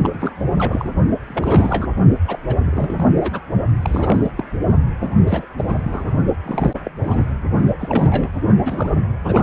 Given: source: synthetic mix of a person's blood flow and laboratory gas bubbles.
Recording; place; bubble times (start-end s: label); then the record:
Doppler ultrasound of blood flow; precordium
0.03-0.33 s: bubbles
0.56-0.89 s: bubbles
1.28-1.89 s: bubbles
2.27-2.38 s: bubbles
2.47-2.55 s: bubbles
2.58-3.41 s: bubbles
3.82-4.31 s: bubbles
4.37-4.45 s: bubbles
5.00-5.46 s: bubbles
5.58-5.64 s: bubbles
5.67-6.17 s: bubbles
6.46-6.74 s: bubbles
6.85-6.91 s: bubbles
7.04-7.26 s: bubbles
7.79-8.31 s: bubbles
8.62-8.90 s: bubbles
9.25-9.43 s: bubbles
From the record:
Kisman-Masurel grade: 342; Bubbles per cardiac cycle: rolling drumbeat, 9 or more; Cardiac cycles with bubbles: 100%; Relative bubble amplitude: moderate (0.250 to 0.450); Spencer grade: 3 (all of the cardiac periods contain showers or single bubble signals, but not dominating or overriding the cardiac motion signals); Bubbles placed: only in the low amplitude regions of the cardiac cycle